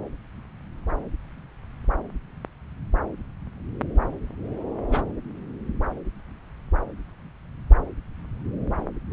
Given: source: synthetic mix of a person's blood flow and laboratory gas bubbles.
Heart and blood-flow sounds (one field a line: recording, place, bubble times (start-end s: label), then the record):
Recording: Doppler ultrasound of blood flow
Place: subclavian vein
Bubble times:
4.90-5.04 s: bubbles
From the record:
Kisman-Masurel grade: 112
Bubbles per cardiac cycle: 1 to 2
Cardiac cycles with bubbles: 1 to 10%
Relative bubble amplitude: moderate (0.250 to 0.450)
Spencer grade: 1 (occasional bubble signal discernible with the cardiac motion signal, with majority of cardiac periods free of bubbles)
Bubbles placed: anywhere in the cardiac cycle